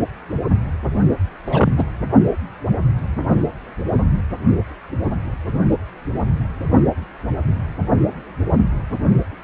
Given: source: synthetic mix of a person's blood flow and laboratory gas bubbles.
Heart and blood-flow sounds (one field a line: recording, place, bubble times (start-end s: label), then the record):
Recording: Doppler ultrasound of blood flow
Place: precordium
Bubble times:
1.44-1.85 s: bubbles
From the record:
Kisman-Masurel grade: 223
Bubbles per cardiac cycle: several, 3 to 8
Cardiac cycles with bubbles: 10 to 50%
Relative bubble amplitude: loud (0.450 to 0.775)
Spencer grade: 2 (many but less than half of the cardiac periods contain bubble signals, singularly or in groups)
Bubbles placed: anywhere in the cardiac cycle